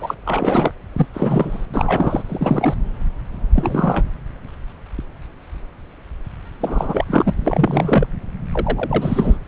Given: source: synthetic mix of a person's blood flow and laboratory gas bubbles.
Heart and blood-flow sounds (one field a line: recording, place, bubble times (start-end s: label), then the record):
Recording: Doppler ultrasound of blood flow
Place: subclavian vein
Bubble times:
0.00-0.17 s: bubbles
0.26-0.71 s: bubbles
0.96-1.06 s: bubbles
1.13-1.66 s: bubbles
1.74-2.22 s: bubbles
2.25-2.76 s: bubbles
3.54-4.05 s: bubbles
6.60-7.05 s: bubbles
7.08-8.06 s: bubbles
8.53-9.38 s: bubbles
From the record:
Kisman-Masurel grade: 332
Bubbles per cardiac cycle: rolling drumbeat, 9 or more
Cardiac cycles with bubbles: 50 to 99%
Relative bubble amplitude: moderate (0.250 to 0.450)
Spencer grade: 3 (all of the cardiac periods contain showers or single bubble signals, but not dominating or overriding the cardiac motion signals)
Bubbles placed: anywhere in the cardiac cycle